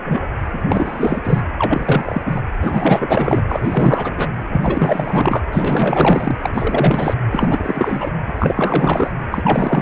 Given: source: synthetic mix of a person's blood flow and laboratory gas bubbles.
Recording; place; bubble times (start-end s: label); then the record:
Doppler ultrasound of blood flow; precordium
0.04-0.27 s: bubbles
0.52-0.61 s: bubbles
0.68-1.21 s: bubbles
1.24-1.42 s: bubbles
1.58-2.41 s: bubbles
2.53-3.42 s: bubbles
3.48-4.28 s: bubbles
4.49-5.43 s: bubbles
5.52-6.36 s: bubbles
6.43-7.13 s: bubbles
7.30-8.11 s: bubbles
8.26-9.11 s: bubbles
9.31-9.82 s: bubbles
From the record:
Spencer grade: 4 (maximum detectable bubble signal sounding continuously throughout systole and diastole of every cardiac period, and overriding the amplitude of the normal cardiac signals); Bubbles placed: anywhere in the cardiac cycle